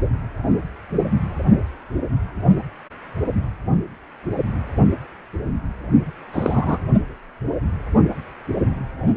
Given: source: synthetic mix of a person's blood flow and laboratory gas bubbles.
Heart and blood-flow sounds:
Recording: Doppler ultrasound of blood flow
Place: precordium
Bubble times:
6.32-6.78 s: bubbles
From the record:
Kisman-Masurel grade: 212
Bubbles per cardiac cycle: several, 3 to 8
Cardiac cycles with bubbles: 1 to 10%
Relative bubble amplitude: moderate (0.250 to 0.450)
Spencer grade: 1 (occasional bubble signal discernible with the cardiac motion signal, with majority of cardiac periods free of bubbles)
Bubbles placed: only in the low amplitude regions of the cardiac cycle

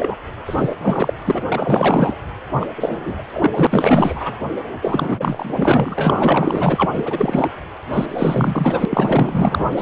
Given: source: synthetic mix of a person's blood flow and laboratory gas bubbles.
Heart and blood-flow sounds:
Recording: Doppler ultrasound of blood flow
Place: precordium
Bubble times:
0.00-0.15 s: bubbles
0.46-0.76 s: bubbles
0.81-1.14 s: bubbles
1.26-1.42 s: bubbles
1.49-2.16 s: bubbles
2.60-2.66 s: bubbles
2.76-3.23 s: bubbles
3.33-3.51 s: bubbles
3.53-3.67 s: bubbles
3.71-4.35 s: bubbles
4.81-6.86 s: bubbles
6.92-7.52 s: bubbles
7.92-8.06 s: bubbles
8.09-8.86 s: bubbles
8.90-9.65 s: bubbles
9.73-9.82 s: bubbles
From the record:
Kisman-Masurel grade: 444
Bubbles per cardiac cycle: continuous sound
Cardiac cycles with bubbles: 100%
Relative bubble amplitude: maximal (0.775 to 0.999)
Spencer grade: 4 (maximum detectable bubble signal sounding continuously throughout systole and diastole of every cardiac period, and overriding the amplitude of the normal cardiac signals)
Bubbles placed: anywhere in the cardiac cycle

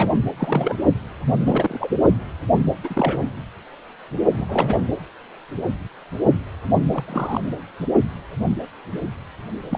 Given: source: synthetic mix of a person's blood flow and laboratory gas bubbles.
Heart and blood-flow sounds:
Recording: Doppler ultrasound of blood flow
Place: precordium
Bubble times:
0.00-0.18 s: bubbles
0.37-0.77 s: bubbles
1.42-1.88 s: bubbles
2.83-3.27 s: bubbles
4.32-4.83 s: bubbles
6.94-7.04 s: bubbles
7.07-7.41 s: bubbles
9.71-9.78 s: bubbles
From the record:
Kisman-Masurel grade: 222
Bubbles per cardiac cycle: several, 3 to 8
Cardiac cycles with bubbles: 10 to 50%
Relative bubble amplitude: moderate (0.250 to 0.450)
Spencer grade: 2 (many but less than half of the cardiac periods contain bubble signals, singularly or in groups)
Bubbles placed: anywhere in the cardiac cycle

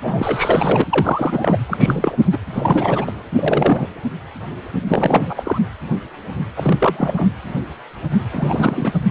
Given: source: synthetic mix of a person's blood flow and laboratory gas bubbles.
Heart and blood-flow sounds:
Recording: Doppler ultrasound of blood flow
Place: precordium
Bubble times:
0.03-0.84 s: bubbles
0.90-1.58 s: bubbles
1.66-2.17 s: bubbles
2.31-2.38 s: bubbles
2.53-3.11 s: bubbles
3.28-3.89 s: bubbles
4.87-5.58 s: bubbles
6.57-7.28 s: bubbles
8.30-8.93 s: bubbles
From the record:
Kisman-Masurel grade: 333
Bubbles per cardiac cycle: rolling drumbeat, 9 or more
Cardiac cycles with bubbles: 50 to 99%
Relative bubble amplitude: loud (0.450 to 0.775)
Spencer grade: 3 (all of the cardiac periods contain showers or single bubble signals, but not dominating or overriding the cardiac motion signals)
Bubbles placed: anywhere in the cardiac cycle

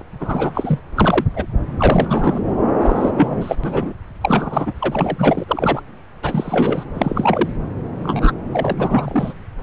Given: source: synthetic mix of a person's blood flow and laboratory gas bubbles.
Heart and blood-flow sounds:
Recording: Doppler ultrasound of blood flow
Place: subclavian vein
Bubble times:
0.00-0.02 s: bubbles
0.20-0.52 s: bubbles
0.54-0.79 s: bubbles
0.96-1.24 s: bubbles
1.35-1.46 s: bubbles
1.77-2.40 s: bubbles
2.79-3.11 s: bubbles
3.15-3.56 s: bubbles
3.63-3.94 s: bubbles
4.21-4.73 s: bubbles
4.79-5.44 s: bubbles
5.48-5.83 s: bubbles
6.22-6.84 s: bubbles
6.95-7.50 s: bubbles
8.03-8.32 s: bubbles
8.53-8.72 s: bubbles
8.77-9.34 s: bubbles
From the record:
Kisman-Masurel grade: 243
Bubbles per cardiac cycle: several, 3 to 8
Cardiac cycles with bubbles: 100%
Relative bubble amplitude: loud (0.450 to 0.775)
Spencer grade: 3 (all of the cardiac periods contain showers or single bubble signals, but not dominating or overriding the cardiac motion signals)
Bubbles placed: anywhere in the cardiac cycle

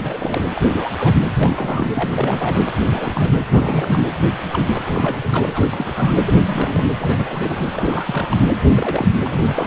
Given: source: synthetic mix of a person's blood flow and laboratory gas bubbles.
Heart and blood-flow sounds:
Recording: Doppler ultrasound of blood flow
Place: precordium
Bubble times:
0.00-0.44 s: bubbles
0.51-0.61 s: bubbles
0.70-0.91 s: bubbles
0.99-1.14 s: bubbles
1.39-1.88 s: bubbles
1.93-2.65 s: bubbles
2.78-3.46 s: bubbles
3.49-4.16 s: bubbles
4.48-4.67 s: bubbles
4.73-5.29 s: bubbles
5.32-5.91 s: bubbles
5.95-6.13 s: bubbles
6.25-6.34 s: bubbles
6.46-6.90 s: bubbles
6.99-7.63 s: bubbles
7.73-8.42 s: bubbles
8.63-9.07 s: bubbles
9.22-9.67 s: bubbles
From the record:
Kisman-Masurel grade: 342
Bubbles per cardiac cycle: rolling drumbeat, 9 or more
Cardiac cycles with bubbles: 100%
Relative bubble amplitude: moderate (0.250 to 0.450)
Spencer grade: 3 (all of the cardiac periods contain showers or single bubble signals, but not dominating or overriding the cardiac motion signals)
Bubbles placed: anywhere in the cardiac cycle

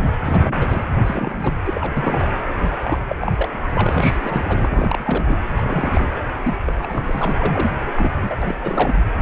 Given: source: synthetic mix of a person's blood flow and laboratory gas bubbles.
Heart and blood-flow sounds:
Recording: Doppler ultrasound of blood flow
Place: precordium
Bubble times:
0.00-0.16 s: bubbles
0.24-0.84 s: bubbles
1.05-1.54 s: bubbles
1.66-2.35 s: bubbles
2.59-2.76 s: bubbles
2.83-2.98 s: bubbles
3.09-3.57 s: bubbles
3.73-4.17 s: bubbles
4.21-5.24 s: bubbles
5.28-5.36 s: bubbles
5.55-6.15 s: bubbles
6.42-6.56 s: bubbles
6.66-7.35 s: bubbles
7.39-7.70 s: bubbles
7.73-8.12 s: bubbles
8.21-8.36 s: bubbles
8.41-8.54 s: bubbles
8.61-8.95 s: bubbles
9.19-9.22 s: bubbles
From the record:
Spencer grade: 3 (all of the cardiac periods contain showers or single bubble signals, but not dominating or overriding the cardiac motion signals)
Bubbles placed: anywhere in the cardiac cycle

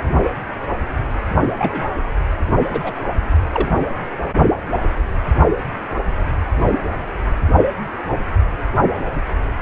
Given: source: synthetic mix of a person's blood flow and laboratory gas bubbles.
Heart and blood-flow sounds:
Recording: Doppler ultrasound of blood flow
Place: precordium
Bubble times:
1.58-1.83 s: bubbles
2.71-2.92 s: bubbles
3.54-3.68 s: bubbles
From the record:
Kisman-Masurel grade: 122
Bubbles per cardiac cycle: 1 to 2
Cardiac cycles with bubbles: 10 to 50%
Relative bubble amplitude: moderate (0.250 to 0.450)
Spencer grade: 2 (many but less than half of the cardiac periods contain bubble signals, singularly or in groups)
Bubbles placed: only in the low amplitude regions of the cardiac cycle

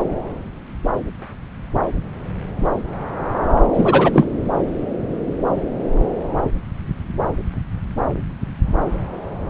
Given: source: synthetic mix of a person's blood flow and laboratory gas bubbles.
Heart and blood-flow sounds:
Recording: Doppler ultrasound of blood flow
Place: subclavian vein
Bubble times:
3.73-4.24 s: bubbles
From the record:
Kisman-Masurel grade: 213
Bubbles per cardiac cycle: several, 3 to 8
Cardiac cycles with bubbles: 1 to 10%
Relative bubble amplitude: loud (0.450 to 0.775)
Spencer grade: 1 (occasional bubble signal discernible with the cardiac motion signal, with majority of cardiac periods free of bubbles)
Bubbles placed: anywhere in the cardiac cycle

